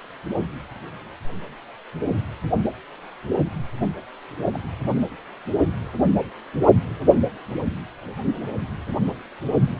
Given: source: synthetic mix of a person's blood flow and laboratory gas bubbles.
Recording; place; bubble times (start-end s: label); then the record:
Doppler ultrasound of blood flow; precordium
4.53-4.59 s: bubbles
From the record:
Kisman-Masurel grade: 111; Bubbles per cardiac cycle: 1 to 2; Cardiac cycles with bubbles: 1 to 10%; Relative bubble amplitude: barely perceptible (0.100 to 0.250); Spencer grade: 1 (occasional bubble signal discernible with the cardiac motion signal, with majority of cardiac periods free of bubbles); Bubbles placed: anywhere in the cardiac cycle